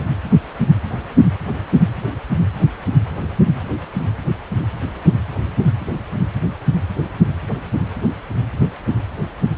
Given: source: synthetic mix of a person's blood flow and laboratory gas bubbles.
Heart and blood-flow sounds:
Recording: Doppler ultrasound of blood flow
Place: precordium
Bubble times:
no bubbles
From the record:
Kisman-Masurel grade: 000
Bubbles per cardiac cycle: 0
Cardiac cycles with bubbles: 0%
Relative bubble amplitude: no bubbles discernible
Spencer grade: 0 (complete lack of bubble signals)

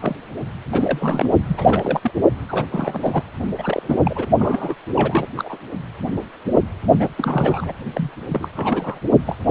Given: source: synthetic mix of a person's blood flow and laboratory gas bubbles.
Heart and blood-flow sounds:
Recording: Doppler ultrasound of blood flow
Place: precordium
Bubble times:
0.01-0.15 s: bubbles
0.72-1.31 s: bubbles
1.47-2.11 s: bubbles
2.48-3.22 s: bubbles
3.58-4.02 s: bubbles
4.04-4.25 s: bubbles
4.38-4.75 s: bubbles
4.95-5.29 s: bubbles
5.36-5.58 s: bubbles
6.98-7.08 s: bubbles
7.18-7.74 s: bubbles
7.94-8.11 s: bubbles
8.28-8.48 s: bubbles
8.56-8.99 s: bubbles
9.26-9.36 s: bubbles
9.46-9.51 s: bubbles
From the record:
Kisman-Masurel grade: 332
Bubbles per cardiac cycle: rolling drumbeat, 9 or more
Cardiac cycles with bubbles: 50 to 99%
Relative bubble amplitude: moderate (0.250 to 0.450)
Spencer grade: 3 (all of the cardiac periods contain showers or single bubble signals, but not dominating or overriding the cardiac motion signals)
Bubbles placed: only in the low amplitude regions of the cardiac cycle

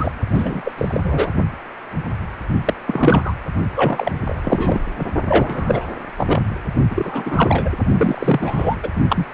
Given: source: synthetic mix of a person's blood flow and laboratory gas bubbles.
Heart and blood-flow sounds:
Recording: Doppler ultrasound of blood flow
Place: precordium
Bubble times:
0.00-0.11 s: bubbles
0.30-0.61 s: bubbles
0.64-0.72 s: bubbles
0.77-1.00 s: bubbles
1.03-1.31 s: bubbles
2.65-2.74 s: bubbles
2.87-3.33 s: bubbles
3.75-4.20 s: bubbles
4.27-4.84 s: bubbles
4.99-5.05 s: bubbles
5.28-5.86 s: bubbles
6.18-6.40 s: bubbles
6.90-7.70 s: bubbles
7.97-8.77 s: bubbles
8.82-8.90 s: bubbles
9.09-9.27 s: bubbles
From the record:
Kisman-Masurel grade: 333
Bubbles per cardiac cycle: rolling drumbeat, 9 or more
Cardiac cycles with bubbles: 50 to 99%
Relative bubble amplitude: loud (0.450 to 0.775)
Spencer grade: 3 (all of the cardiac periods contain showers or single bubble signals, but not dominating or overriding the cardiac motion signals)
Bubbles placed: only in the low amplitude regions of the cardiac cycle

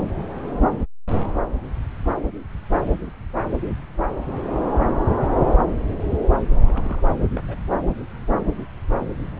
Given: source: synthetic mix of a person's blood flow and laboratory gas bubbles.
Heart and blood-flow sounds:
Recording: Doppler ultrasound of blood flow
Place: subclavian vein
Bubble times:
3.06-3.10 s: bubbles
5.48-5.59 s: bubbles
6.65-7.02 s: bubbles
7.33-7.41 s: bubbles
7.48-7.58 s: bubbles
From the record:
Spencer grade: 2 (many but less than half of the cardiac periods contain bubble signals, singularly or in groups)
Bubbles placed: anywhere in the cardiac cycle

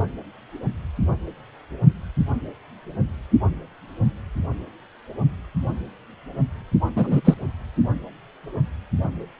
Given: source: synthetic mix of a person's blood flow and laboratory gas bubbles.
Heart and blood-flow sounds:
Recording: Doppler ultrasound of blood flow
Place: precordium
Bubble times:
6.96-7.21 s: bubbles
7.25-7.34 s: bubbles
From the record:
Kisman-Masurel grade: 113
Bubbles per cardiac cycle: 1 to 2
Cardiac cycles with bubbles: 1 to 10%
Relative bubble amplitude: loud (0.450 to 0.775)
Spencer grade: 1 (occasional bubble signal discernible with the cardiac motion signal, with majority of cardiac periods free of bubbles)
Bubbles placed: anywhere in the cardiac cycle

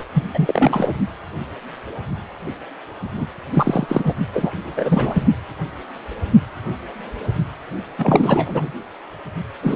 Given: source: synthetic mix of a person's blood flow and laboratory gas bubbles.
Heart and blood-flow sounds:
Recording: Doppler ultrasound of blood flow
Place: precordium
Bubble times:
0.00-0.04 s: bubbles
0.14-0.24 s: bubbles
0.33-0.94 s: bubbles
3.15-3.27 s: bubbles
3.53-4.14 s: bubbles
4.33-4.50 s: bubbles
4.55-5.27 s: bubbles
7.98-8.71 s: bubbles
9.62-9.76 s: bubbles
From the record:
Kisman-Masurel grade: 333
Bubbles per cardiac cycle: rolling drumbeat, 9 or more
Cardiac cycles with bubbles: 50 to 99%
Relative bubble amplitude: loud (0.450 to 0.775)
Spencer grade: 3 (all of the cardiac periods contain showers or single bubble signals, but not dominating or overriding the cardiac motion signals)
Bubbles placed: only in the low amplitude regions of the cardiac cycle

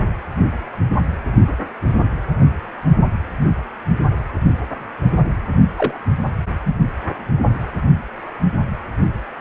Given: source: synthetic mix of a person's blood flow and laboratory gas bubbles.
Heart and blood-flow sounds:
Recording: Doppler ultrasound of blood flow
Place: precordium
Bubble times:
5.78-6.00 s: bubbles
6.66-6.75 s: bubbles
From the record:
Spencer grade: 1 (occasional bubble signal discernible with the cardiac motion signal, with majority of cardiac periods free of bubbles)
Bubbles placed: only in the low amplitude regions of the cardiac cycle

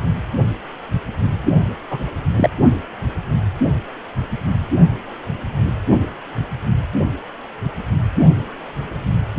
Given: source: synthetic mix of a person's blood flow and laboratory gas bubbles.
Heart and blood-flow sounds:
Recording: Doppler ultrasound of blood flow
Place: precordium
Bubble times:
1.91-1.99 s: bubbles
2.37-2.50 s: bubbles
From the record:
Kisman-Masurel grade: 112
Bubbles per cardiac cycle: 1 to 2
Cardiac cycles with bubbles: 1 to 10%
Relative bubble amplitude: moderate (0.250 to 0.450)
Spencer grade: 1 (occasional bubble signal discernible with the cardiac motion signal, with majority of cardiac periods free of bubbles)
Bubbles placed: only in the low amplitude regions of the cardiac cycle

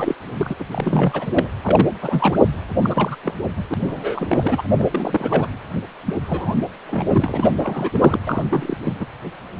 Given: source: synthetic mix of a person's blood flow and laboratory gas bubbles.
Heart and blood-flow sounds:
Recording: Doppler ultrasound of blood flow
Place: precordium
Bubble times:
0.00-0.14 s: bubbles
0.35-0.56 s: bubbles
0.59-0.65 s: bubbles
0.73-1.50 s: bubbles
1.62-1.88 s: bubbles
2.01-2.38 s: bubbles
2.77-3.15 s: bubbles
3.23-3.34 s: bubbles
3.56-3.63 s: bubbles
3.70-3.74 s: bubbles
3.80-4.62 s: bubbles
4.79-4.87 s: bubbles
4.91-5.47 s: bubbles
6.06-6.13 s: bubbles
6.24-6.60 s: bubbles
6.88-7.50 s: bubbles
7.60-8.20 s: bubbles
8.27-8.44 s: bubbles
8.50-8.76 s: bubbles
8.83-8.93 s: bubbles
9.00-9.06 s: bubbles
From the record:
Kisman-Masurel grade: 342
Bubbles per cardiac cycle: rolling drumbeat, 9 or more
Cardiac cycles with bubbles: 100%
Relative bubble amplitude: moderate (0.250 to 0.450)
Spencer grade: 3 (all of the cardiac periods contain showers or single bubble signals, but not dominating or overriding the cardiac motion signals)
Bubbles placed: anywhere in the cardiac cycle

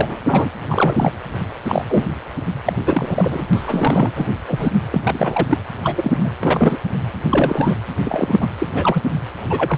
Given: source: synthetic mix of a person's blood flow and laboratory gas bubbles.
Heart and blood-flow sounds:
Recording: Doppler ultrasound of blood flow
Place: precordium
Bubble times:
0.00-0.17 s: bubbles
0.26-0.51 s: bubbles
0.66-1.12 s: bubbles
1.66-1.85 s: bubbles
1.88-2.06 s: bubbles
2.65-2.73 s: bubbles
2.85-3.46 s: bubbles
3.53-4.12 s: bubbles
4.16-4.29 s: bubbles
4.47-4.71 s: bubbles
4.92-5.01 s: bubbles
5.04-5.47 s: bubbles
5.50-5.58 s: bubbles
5.83-6.32 s: bubbles
6.40-6.78 s: bubbles
7.30-7.75 s: bubbles
8.03-8.48 s: bubbles
8.59-8.67 s: bubbles
8.73-9.03 s: bubbles
9.49-9.78 s: bubbles
From the record:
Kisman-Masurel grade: 243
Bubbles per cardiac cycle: several, 3 to 8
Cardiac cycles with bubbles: 100%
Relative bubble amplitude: loud (0.450 to 0.775)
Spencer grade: 3 (all of the cardiac periods contain showers or single bubble signals, but not dominating or overriding the cardiac motion signals)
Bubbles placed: anywhere in the cardiac cycle

